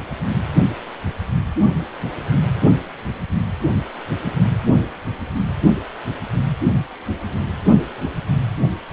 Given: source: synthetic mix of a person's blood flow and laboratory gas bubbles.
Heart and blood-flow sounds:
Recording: Doppler ultrasound of blood flow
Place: precordium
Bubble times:
no bubbles
From the record:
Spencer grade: 0 (complete lack of bubble signals)

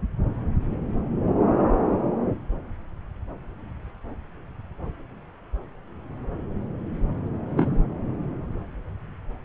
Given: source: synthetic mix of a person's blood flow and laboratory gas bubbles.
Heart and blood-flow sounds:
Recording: Doppler ultrasound of blood flow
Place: subclavian vein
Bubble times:
7.57-7.82 s: bubbles
From the record:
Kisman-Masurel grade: 122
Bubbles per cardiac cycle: 1 to 2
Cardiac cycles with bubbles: 10 to 50%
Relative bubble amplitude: moderate (0.250 to 0.450)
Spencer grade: 2 (many but less than half of the cardiac periods contain bubble signals, singularly or in groups)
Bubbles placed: anywhere in the cardiac cycle

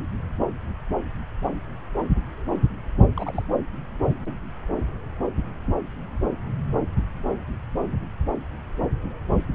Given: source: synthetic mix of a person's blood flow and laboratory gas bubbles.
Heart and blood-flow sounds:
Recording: Doppler ultrasound of blood flow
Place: subclavian vein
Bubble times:
3.17-3.43 s: bubbles
From the record:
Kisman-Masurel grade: 211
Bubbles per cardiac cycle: several, 3 to 8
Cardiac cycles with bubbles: 1 to 10%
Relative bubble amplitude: barely perceptible (0.100 to 0.250)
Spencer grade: 1 (occasional bubble signal discernible with the cardiac motion signal, with majority of cardiac periods free of bubbles)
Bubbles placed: anywhere in the cardiac cycle

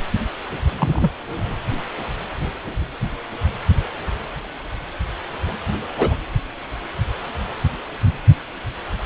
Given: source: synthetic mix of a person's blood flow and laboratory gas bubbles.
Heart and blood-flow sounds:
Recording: Doppler ultrasound of blood flow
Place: precordium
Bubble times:
0.78-1.11 s: bubbles
5.97-6.14 s: bubbles
From the record:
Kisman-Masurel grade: 113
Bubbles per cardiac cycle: 1 to 2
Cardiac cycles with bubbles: 1 to 10%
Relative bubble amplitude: loud (0.450 to 0.775)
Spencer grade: 1 (occasional bubble signal discernible with the cardiac motion signal, with majority of cardiac periods free of bubbles)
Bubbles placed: anywhere in the cardiac cycle

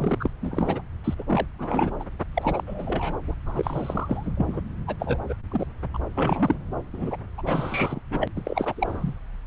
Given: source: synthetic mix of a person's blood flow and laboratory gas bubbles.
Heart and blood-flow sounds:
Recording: Doppler ultrasound of blood flow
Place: subclavian vein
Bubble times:
0.00-0.30 s: bubbles
0.42-0.82 s: bubbles
1.04-1.15 s: bubbles
1.19-1.24 s: bubbles
1.26-1.47 s: bubbles
1.58-1.91 s: bubbles
1.99-2.04 s: bubbles
2.33-2.63 s: bubbles
2.67-3.18 s: bubbles
3.28-3.34 s: bubbles
3.46-4.33 s: bubbles
4.37-4.61 s: bubbles
4.87-4.96 s: bubbles
4.99-5.18 s: bubbles
5.29-5.35 s: bubbles
5.52-5.66 s: bubbles
5.94-5.98 s: bubbles
6.15-6.58 s: bubbles
6.93-7.17 s: bubbles
7.38-7.42 s: bubbles
7.46-8.01 s: bubbles
8.10-8.28 s: bubbles
8.36-8.42 s: bubbles
8.45-8.73 s: bubbles
8.76-9.16 s: bubbles
From the record:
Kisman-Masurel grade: 342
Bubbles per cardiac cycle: rolling drumbeat, 9 or more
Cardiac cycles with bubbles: 100%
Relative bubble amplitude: moderate (0.250 to 0.450)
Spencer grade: 3 (all of the cardiac periods contain showers or single bubble signals, but not dominating or overriding the cardiac motion signals)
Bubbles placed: anywhere in the cardiac cycle

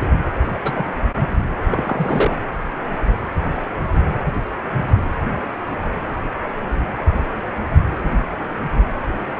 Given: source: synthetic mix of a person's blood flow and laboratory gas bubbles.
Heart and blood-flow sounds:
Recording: Doppler ultrasound of blood flow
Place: precordium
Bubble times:
0.00-0.11 s: bubbles
0.47-0.58 s: bubbles
0.62-0.88 s: bubbles
1.70-2.39 s: bubbles
From the record:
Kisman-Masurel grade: 222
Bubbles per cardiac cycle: several, 3 to 8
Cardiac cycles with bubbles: 10 to 50%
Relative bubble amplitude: moderate (0.250 to 0.450)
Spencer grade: 2 (many but less than half of the cardiac periods contain bubble signals, singularly or in groups)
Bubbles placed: anywhere in the cardiac cycle

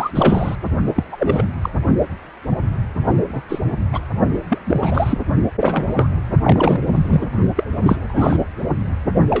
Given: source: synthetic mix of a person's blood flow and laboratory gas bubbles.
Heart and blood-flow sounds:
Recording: Doppler ultrasound of blood flow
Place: precordium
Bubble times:
0.00-0.10 s: bubbles
0.14-0.55 s: bubbles
0.96-1.04 s: bubbles
1.11-1.46 s: bubbles
1.61-1.70 s: bubbles
3.28-3.40 s: bubbles
3.48-3.59 s: bubbles
3.92-4.00 s: bubbles
4.48-4.58 s: bubbles
4.66-5.18 s: bubbles
5.58-5.88 s: bubbles
5.96-6.08 s: bubbles
6.43-6.80 s: bubbles
6.94-7.26 s: bubbles
7.56-7.66 s: bubbles
7.83-7.98 s: bubbles
8.03-8.37 s: bubbles
9.15-9.22 s: bubbles
9.29-9.40 s: bubbles
From the record:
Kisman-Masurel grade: 233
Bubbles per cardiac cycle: several, 3 to 8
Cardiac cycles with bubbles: 50 to 99%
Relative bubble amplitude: loud (0.450 to 0.775)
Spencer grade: 3 (all of the cardiac periods contain showers or single bubble signals, but not dominating or overriding the cardiac motion signals)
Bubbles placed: only in the low amplitude regions of the cardiac cycle

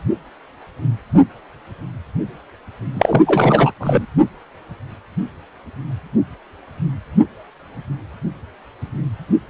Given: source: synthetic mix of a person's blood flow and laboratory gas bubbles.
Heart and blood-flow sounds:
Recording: Doppler ultrasound of blood flow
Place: precordium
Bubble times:
2.93-3.24 s: bubbles
3.27-3.71 s: bubbles
3.80-4.06 s: bubbles
From the record:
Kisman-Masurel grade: 213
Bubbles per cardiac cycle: several, 3 to 8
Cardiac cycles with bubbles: 1 to 10%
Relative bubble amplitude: loud (0.450 to 0.775)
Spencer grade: 1 (occasional bubble signal discernible with the cardiac motion signal, with majority of cardiac periods free of bubbles)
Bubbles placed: only in the low amplitude regions of the cardiac cycle

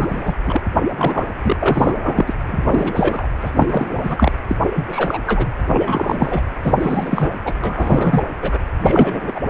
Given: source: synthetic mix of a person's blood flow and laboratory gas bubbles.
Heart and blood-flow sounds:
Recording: Doppler ultrasound of blood flow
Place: precordium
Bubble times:
0.00-0.33 s: bubbles
0.46-0.61 s: bubbles
0.98-1.28 s: bubbles
1.42-1.54 s: bubbles
1.59-2.33 s: bubbles
2.48-3.28 s: bubbles
3.41-3.51 s: bubbles
3.54-4.32 s: bubbles
4.47-4.57 s: bubbles
4.75-4.85 s: bubbles
4.88-5.18 s: bubbles
5.27-5.47 s: bubbles
5.67-6.43 s: bubbles
6.62-7.33 s: bubbles
7.45-7.54 s: bubbles
7.62-8.22 s: bubbles
8.41-8.59 s: bubbles
8.80-9.33 s: bubbles
9.35-9.41 s: bubbles
From the record:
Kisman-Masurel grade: 342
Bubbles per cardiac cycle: rolling drumbeat, 9 or more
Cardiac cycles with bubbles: 100%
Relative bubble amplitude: moderate (0.250 to 0.450)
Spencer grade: 3 (all of the cardiac periods contain showers or single bubble signals, but not dominating or overriding the cardiac motion signals)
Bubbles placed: anywhere in the cardiac cycle

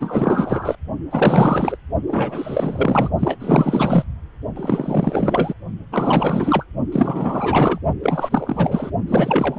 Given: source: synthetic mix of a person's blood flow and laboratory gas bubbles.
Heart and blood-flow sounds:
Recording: Doppler ultrasound of blood flow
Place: precordium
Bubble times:
0.00-0.75 s: bubbles
1.11-1.78 s: bubbles
2.08-3.10 s: bubbles
3.19-4.04 s: bubbles
4.56-5.53 s: bubbles
5.92-6.65 s: bubbles
6.92-7.78 s: bubbles
8.03-8.91 s: bubbles
9.07-9.59 s: bubbles
From the record:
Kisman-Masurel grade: 444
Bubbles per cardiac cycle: continuous sound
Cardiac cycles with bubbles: 100%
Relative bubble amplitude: maximal (0.775 to 0.999)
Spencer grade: 4 (maximum detectable bubble signal sounding continuously throughout systole and diastole of every cardiac period, and overriding the amplitude of the normal cardiac signals)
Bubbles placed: only in the low amplitude regions of the cardiac cycle

